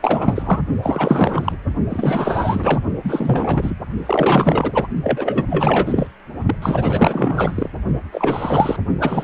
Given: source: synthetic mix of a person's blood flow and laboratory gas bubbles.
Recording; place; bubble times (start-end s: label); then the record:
Doppler ultrasound of blood flow; precordium
0.02-0.59 s: bubbles
0.82-1.56 s: bubbles
1.89-2.81 s: bubbles
3.04-3.75 s: bubbles
4.06-4.88 s: bubbles
5.03-5.46 s: bubbles
5.50-6.08 s: bubbles
6.46-6.55 s: bubbles
6.62-7.71 s: bubbles
8.11-8.76 s: bubbles
9.00-9.24 s: bubbles
From the record:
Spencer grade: 4 (maximum detectable bubble signal sounding continuously throughout systole and diastole of every cardiac period, and overriding the amplitude of the normal cardiac signals); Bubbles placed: only in the low amplitude regions of the cardiac cycle